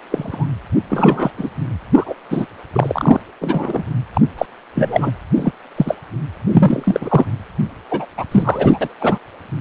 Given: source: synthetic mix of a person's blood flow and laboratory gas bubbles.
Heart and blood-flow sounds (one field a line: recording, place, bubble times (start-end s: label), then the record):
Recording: Doppler ultrasound of blood flow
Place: precordium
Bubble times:
0.09-0.47 s: bubbles
0.90-1.30 s: bubbles
1.38-1.50 s: bubbles
1.94-2.15 s: bubbles
2.29-2.46 s: bubbles
2.73-3.20 s: bubbles
3.41-3.83 s: bubbles
4.13-4.21 s: bubbles
4.38-4.46 s: bubbles
4.75-5.12 s: bubbles
5.34-5.51 s: bubbles
5.76-5.96 s: bubbles
6.48-7.25 s: bubbles
7.91-8.06 s: bubbles
8.18-8.25 s: bubbles
8.31-8.79 s: bubbles
8.81-8.88 s: bubbles
9.01-9.19 s: bubbles
From the record:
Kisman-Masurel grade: 233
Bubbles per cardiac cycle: several, 3 to 8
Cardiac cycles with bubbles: 50 to 99%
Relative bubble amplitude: loud (0.450 to 0.775)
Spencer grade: 3 (all of the cardiac periods contain showers or single bubble signals, but not dominating or overriding the cardiac motion signals)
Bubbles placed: anywhere in the cardiac cycle